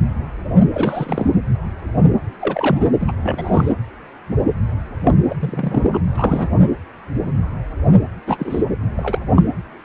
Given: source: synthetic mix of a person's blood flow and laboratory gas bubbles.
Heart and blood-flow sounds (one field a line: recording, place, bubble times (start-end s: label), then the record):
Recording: Doppler ultrasound of blood flow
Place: precordium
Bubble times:
0.73-1.35 s: bubbles
2.40-2.86 s: bubbles
3.00-3.11 s: bubbles
3.22-3.72 s: bubbles
5.00-5.15 s: bubbles
5.29-5.36 s: bubbles
5.39-6.00 s: bubbles
6.15-6.49 s: bubbles
8.27-8.66 s: bubbles
8.97-9.19 s: bubbles
9.36-9.44 s: bubbles
From the record:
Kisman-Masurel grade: 232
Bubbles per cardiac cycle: several, 3 to 8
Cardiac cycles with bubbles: 50 to 99%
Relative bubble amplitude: moderate (0.250 to 0.450)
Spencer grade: 3 (all of the cardiac periods contain showers or single bubble signals, but not dominating or overriding the cardiac motion signals)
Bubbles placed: anywhere in the cardiac cycle